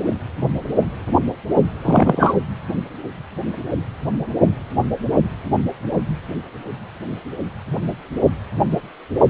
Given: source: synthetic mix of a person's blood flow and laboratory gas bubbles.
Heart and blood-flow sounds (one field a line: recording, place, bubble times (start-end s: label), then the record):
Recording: Doppler ultrasound of blood flow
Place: precordium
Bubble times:
1.84-2.35 s: bubbles
From the record:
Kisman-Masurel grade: 113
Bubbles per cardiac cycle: 1 to 2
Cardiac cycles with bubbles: 1 to 10%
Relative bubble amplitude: loud (0.450 to 0.775)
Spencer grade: 1 (occasional bubble signal discernible with the cardiac motion signal, with majority of cardiac periods free of bubbles)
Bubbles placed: anywhere in the cardiac cycle